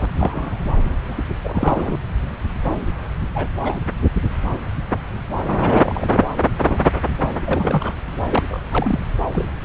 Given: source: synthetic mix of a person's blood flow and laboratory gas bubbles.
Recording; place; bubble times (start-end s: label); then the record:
Doppler ultrasound of blood flow; subclavian vein
0.00-0.05 s: bubbles
0.16-0.59 s: bubbles
1.05-1.15 s: bubbles
1.44-1.98 s: bubbles
3.35-3.47 s: bubbles
3.62-3.78 s: bubbles
4.53-4.58 s: bubbles
5.58-6.25 s: bubbles
6.61-6.89 s: bubbles
7.20-7.29 s: bubbles
7.45-7.93 s: bubbles
8.29-8.60 s: bubbles
8.71-8.98 s: bubbles
9.32-9.49 s: bubbles
From the record:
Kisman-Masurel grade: 232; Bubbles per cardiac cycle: several, 3 to 8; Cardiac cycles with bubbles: 50 to 99%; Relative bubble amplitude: moderate (0.250 to 0.450); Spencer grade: 3 (all of the cardiac periods contain showers or single bubble signals, but not dominating or overriding the cardiac motion signals); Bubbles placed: anywhere in the cardiac cycle